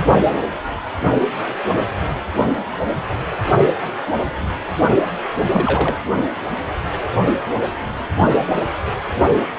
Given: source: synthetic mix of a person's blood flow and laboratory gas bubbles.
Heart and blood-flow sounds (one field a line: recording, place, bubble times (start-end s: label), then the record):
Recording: Doppler ultrasound of blood flow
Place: precordium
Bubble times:
5.37-5.95 s: bubbles
From the record:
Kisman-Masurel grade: 222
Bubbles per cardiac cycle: several, 3 to 8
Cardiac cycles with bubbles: 10 to 50%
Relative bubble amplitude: moderate (0.250 to 0.450)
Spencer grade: 2 (many but less than half of the cardiac periods contain bubble signals, singularly or in groups)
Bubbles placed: only in the low amplitude regions of the cardiac cycle